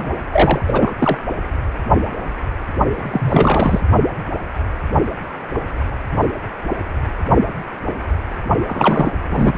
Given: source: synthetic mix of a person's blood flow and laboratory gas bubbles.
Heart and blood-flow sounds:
Doppler ultrasound of blood flow; precordium
0.00-0.12 s: bubbles
0.33-0.61 s: bubbles
0.68-0.91 s: bubbles
0.99-1.18 s: bubbles
2.94-3.80 s: bubbles
8.67-9.12 s: bubbles
9.29-9.54 s: bubbles
From the record:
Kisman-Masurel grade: 333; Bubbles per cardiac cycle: rolling drumbeat, 9 or more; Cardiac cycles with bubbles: 50 to 99%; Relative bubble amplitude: loud (0.450 to 0.775); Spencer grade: 3 (all of the cardiac periods contain showers or single bubble signals, but not dominating or overriding the cardiac motion signals); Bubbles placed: only in the low amplitude regions of the cardiac cycle

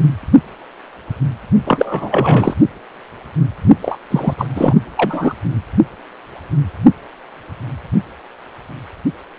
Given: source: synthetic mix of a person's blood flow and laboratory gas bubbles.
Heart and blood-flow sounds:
Doppler ultrasound of blood flow; precordium
1.65-2.54 s: bubbles
3.81-3.98 s: bubbles
4.10-4.34 s: bubbles
4.38-4.47 s: bubbles
4.55-4.75 s: bubbles
4.96-5.33 s: bubbles
From the record:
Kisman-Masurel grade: 223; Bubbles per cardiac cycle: several, 3 to 8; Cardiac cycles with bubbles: 10 to 50%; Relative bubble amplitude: loud (0.450 to 0.775); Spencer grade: 2 (many but less than half of the cardiac periods contain bubble signals, singularly or in groups); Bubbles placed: only in the low amplitude regions of the cardiac cycle

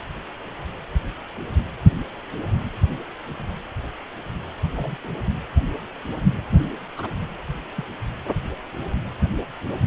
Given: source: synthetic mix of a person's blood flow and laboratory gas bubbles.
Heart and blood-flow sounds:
Doppler ultrasound of blood flow; precordium
4.75-4.97 s: bubbles
5.04-5.08 s: bubbles
6.50-6.64 s: bubbles
6.97-7.08 s: bubbles
7.76-7.84 s: bubbles
From the record:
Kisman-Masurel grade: 121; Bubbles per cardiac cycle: 1 to 2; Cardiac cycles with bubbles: 10 to 50%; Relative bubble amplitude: barely perceptible (0.100 to 0.250); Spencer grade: 2 (many but less than half of the cardiac periods contain bubble signals, singularly or in groups); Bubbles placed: anywhere in the cardiac cycle

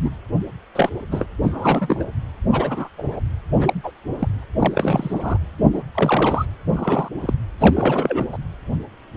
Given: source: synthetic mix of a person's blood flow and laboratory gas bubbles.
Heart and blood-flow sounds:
Doppler ultrasound of blood flow; precordium
0.00-0.10 s: bubbles
0.75-0.90 s: bubbles
1.11-1.26 s: bubbles
1.42-2.03 s: bubbles
2.51-2.88 s: bubbles
2.97-3.20 s: bubbles
3.52-3.73 s: bubbles
3.83-3.92 s: bubbles
4.19-4.28 s: bubbles
4.59-5.38 s: bubbles
5.72-5.83 s: bubbles
5.94-6.46 s: bubbles
6.66-7.08 s: bubbles
7.21-7.33 s: bubbles
7.60-8.27 s: bubbles
8.32-8.38 s: bubbles
From the record:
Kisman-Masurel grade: 232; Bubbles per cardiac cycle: several, 3 to 8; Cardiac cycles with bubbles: 50 to 99%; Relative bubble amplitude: moderate (0.250 to 0.450); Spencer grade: 3 (all of the cardiac periods contain showers or single bubble signals, but not dominating or overriding the cardiac motion signals); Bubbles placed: anywhere in the cardiac cycle

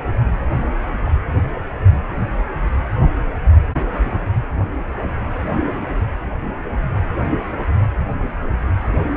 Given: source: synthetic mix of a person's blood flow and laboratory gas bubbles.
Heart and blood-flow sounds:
Doppler ultrasound of blood flow; precordium
1.05-1.11 s: bubbles
From the record:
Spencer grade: 2 (many but less than half of the cardiac periods contain bubble signals, singularly or in groups); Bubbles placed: anywhere in the cardiac cycle

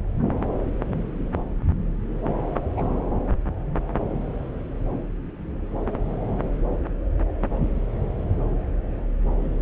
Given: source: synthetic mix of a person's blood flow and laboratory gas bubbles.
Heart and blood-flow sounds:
Doppler ultrasound of blood flow; subclavian vein
2.55-2.59 s: bubbles
2.77-2.82 s: bubbles
From the record:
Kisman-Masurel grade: 121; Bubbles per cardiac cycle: 1 to 2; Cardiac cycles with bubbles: 10 to 50%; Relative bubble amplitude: barely perceptible (0.100 to 0.250); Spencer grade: 2 (many but less than half of the cardiac periods contain bubble signals, singularly or in groups); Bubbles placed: anywhere in the cardiac cycle

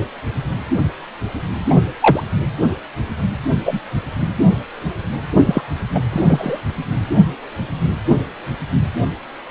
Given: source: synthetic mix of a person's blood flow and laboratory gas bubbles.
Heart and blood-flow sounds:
Doppler ultrasound of blood flow; precordium
1.70-1.75 s: bubbles
2.00-2.23 s: bubbles
3.65-3.80 s: bubbles
5.46-5.62 s: bubbles
5.94-6.02 s: bubbles
6.10-6.60 s: bubbles
From the record:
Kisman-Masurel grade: 123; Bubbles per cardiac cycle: 1 to 2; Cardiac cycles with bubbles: 10 to 50%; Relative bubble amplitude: loud (0.450 to 0.775); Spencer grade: 2 (many but less than half of the cardiac periods contain bubble signals, singularly or in groups); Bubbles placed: anywhere in the cardiac cycle

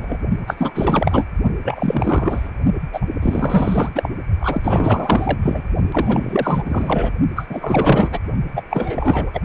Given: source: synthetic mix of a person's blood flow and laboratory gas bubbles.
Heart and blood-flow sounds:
Doppler ultrasound of blood flow; precordium
0.00-0.17 s: bubbles
0.47-1.25 s: bubbles
1.64-2.50 s: bubbles
2.92-3.09 s: bubbles
3.21-3.89 s: bubbles
3.95-4.09 s: bubbles
4.39-5.38 s: bubbles
5.42-5.63 s: bubbles
5.91-7.11 s: bubbles
7.35-7.46 s: bubbles
7.49-8.19 s: bubbles
8.55-8.62 s: bubbles
8.70-9.41 s: bubbles
From the record:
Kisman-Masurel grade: 444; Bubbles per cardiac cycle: continuous sound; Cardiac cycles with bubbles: 100%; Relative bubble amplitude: maximal (0.775 to 0.999); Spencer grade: 4 (maximum detectable bubble signal sounding continuously throughout systole and diastole of every cardiac period, and overriding the amplitude of the normal cardiac signals); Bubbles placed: only in the low amplitude regions of the cardiac cycle

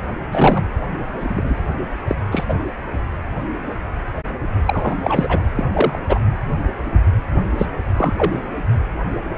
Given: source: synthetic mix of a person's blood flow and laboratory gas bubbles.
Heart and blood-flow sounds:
Doppler ultrasound of blood flow; precordium
0.32-0.67 s: bubbles
1.20-1.62 s: bubbles
2.08-2.15 s: bubbles
2.31-2.44 s: bubbles
2.48-2.54 s: bubbles
4.67-4.96 s: bubbles
5.04-5.42 s: bubbles
5.55-5.64 s: bubbles
5.72-5.99 s: bubbles
6.08-6.20 s: bubbles
7.58-7.66 s: bubbles
7.97-8.14 s: bubbles
8.17-8.40 s: bubbles
From the record:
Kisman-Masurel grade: 233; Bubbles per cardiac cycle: several, 3 to 8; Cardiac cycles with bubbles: 50 to 99%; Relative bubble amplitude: loud (0.450 to 0.775); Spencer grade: 3 (all of the cardiac periods contain showers or single bubble signals, but not dominating or overriding the cardiac motion signals); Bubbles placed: anywhere in the cardiac cycle

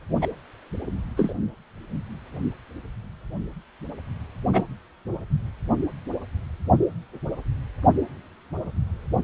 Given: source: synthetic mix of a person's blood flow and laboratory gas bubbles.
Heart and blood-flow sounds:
Doppler ultrasound of blood flow; precordium
0.21-0.27 s: bubbles
1.17-1.33 s: bubbles
4.53-4.64 s: bubbles
From the record:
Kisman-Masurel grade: 122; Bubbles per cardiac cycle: 1 to 2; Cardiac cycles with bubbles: 10 to 50%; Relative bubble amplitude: moderate (0.250 to 0.450); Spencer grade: 2 (many but less than half of the cardiac periods contain bubble signals, singularly or in groups); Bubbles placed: only in the low amplitude regions of the cardiac cycle

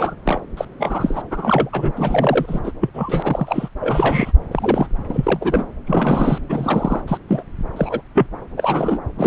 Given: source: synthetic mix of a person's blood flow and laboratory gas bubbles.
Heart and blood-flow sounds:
Doppler ultrasound of blood flow; subclavian vein
0.00-0.15 s: bubbles
0.25-0.40 s: bubbles
0.57-0.65 s: bubbles
0.79-1.22 s: bubbles
1.31-1.70 s: bubbles
1.72-1.92 s: bubbles
1.96-2.60 s: bubbles
2.64-2.72 s: bubbles
2.81-2.90 s: bubbles
2.94-3.69 s: bubbles
3.80-4.32 s: bubbles
4.51-4.88 s: bubbles
5.08-5.66 s: bubbles
5.86-6.38 s: bubbles
6.49-7.01 s: bubbles
7.07-7.17 s: bubbles
7.28-7.43 s: bubbles
7.76-8.02 s: bubbles
8.15-8.27 s: bubbles
8.57-8.99 s: bubbles
9.17-9.27 s: bubbles
From the record:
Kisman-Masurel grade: 242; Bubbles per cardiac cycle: several, 3 to 8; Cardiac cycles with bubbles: 100%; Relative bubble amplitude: moderate (0.250 to 0.450); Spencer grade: 3 (all of the cardiac periods contain showers or single bubble signals, but not dominating or overriding the cardiac motion signals); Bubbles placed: anywhere in the cardiac cycle

